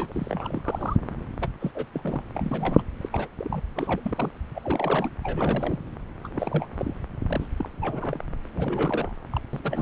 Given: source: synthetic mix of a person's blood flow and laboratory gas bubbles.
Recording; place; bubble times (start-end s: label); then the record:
Doppler ultrasound of blood flow; subclavian vein
0.00-0.61 s: bubbles
0.64-0.96 s: bubbles
1.40-1.49 s: bubbles
1.60-1.71 s: bubbles
1.74-1.85 s: bubbles
1.93-2.22 s: bubbles
2.35-2.83 s: bubbles
3.01-3.09 s: bubbles
3.12-3.28 s: bubbles
3.38-3.62 s: bubbles
3.75-4.31 s: bubbles
4.54-5.12 s: bubbles
5.23-5.83 s: bubbles
6.23-6.29 s: bubbles
6.32-6.67 s: bubbles
6.77-6.94 s: bubbles
7.28-7.48 s: bubbles
7.56-7.68 s: bubbles
7.79-8.19 s: bubbles
8.55-9.12 s: bubbles
9.30-9.40 s: bubbles
9.53-9.59 s: bubbles
9.63-9.82 s: bubbles
From the record:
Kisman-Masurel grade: 342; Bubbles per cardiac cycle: rolling drumbeat, 9 or more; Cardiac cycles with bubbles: 100%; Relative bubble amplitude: moderate (0.250 to 0.450); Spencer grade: 3 (all of the cardiac periods contain showers or single bubble signals, but not dominating or overriding the cardiac motion signals); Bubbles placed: anywhere in the cardiac cycle